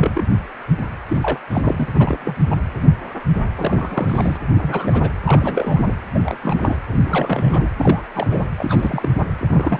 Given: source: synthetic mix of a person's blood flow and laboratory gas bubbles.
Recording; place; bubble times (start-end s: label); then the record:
Doppler ultrasound of blood flow; precordium
0.00-0.23 s: bubbles
1.08-1.18 s: bubbles
1.22-1.38 s: bubbles
1.50-1.86 s: bubbles
1.91-2.35 s: bubbles
2.50-2.56 s: bubbles
3.56-4.38 s: bubbles
4.53-5.10 s: bubbles
5.25-5.94 s: bubbles
6.14-6.38 s: bubbles
6.41-6.76 s: bubbles
6.92-6.97 s: bubbles
7.04-7.69 s: bubbles
7.78-8.03 s: bubbles
8.13-8.50 s: bubbles
8.58-9.09 s: bubbles
9.18-9.22 s: bubbles
9.38-9.79 s: bubbles
From the record:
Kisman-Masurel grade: 332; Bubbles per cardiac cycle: rolling drumbeat, 9 or more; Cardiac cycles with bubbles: 50 to 99%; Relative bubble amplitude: moderate (0.250 to 0.450); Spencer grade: 3 (all of the cardiac periods contain showers or single bubble signals, but not dominating or overriding the cardiac motion signals); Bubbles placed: anywhere in the cardiac cycle